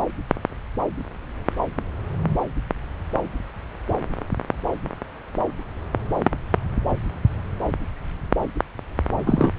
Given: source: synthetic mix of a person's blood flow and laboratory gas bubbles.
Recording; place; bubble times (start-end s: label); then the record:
Doppler ultrasound of blood flow; subclavian vein
9.26-9.50 s: bubbles
From the record:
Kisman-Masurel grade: 113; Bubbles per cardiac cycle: 1 to 2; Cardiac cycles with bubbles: 1 to 10%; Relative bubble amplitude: loud (0.450 to 0.775); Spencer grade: 1 (occasional bubble signal discernible with the cardiac motion signal, with majority of cardiac periods free of bubbles); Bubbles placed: anywhere in the cardiac cycle